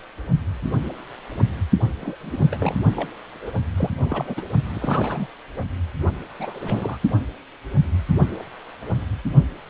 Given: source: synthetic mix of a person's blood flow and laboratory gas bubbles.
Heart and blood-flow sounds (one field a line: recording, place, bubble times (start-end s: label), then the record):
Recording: Doppler ultrasound of blood flow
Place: precordium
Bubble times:
2.00-2.15 s: bubbles
2.19-2.76 s: bubbles
2.96-3.09 s: bubbles
3.27-3.52 s: bubbles
3.75-3.90 s: bubbles
4.03-4.43 s: bubbles
4.74-5.27 s: bubbles
6.40-6.97 s: bubbles
From the record:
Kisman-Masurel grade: 222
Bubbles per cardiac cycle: several, 3 to 8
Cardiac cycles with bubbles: 10 to 50%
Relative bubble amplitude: moderate (0.250 to 0.450)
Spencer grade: 2 (many but less than half of the cardiac periods contain bubble signals, singularly or in groups)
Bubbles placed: only in the low amplitude regions of the cardiac cycle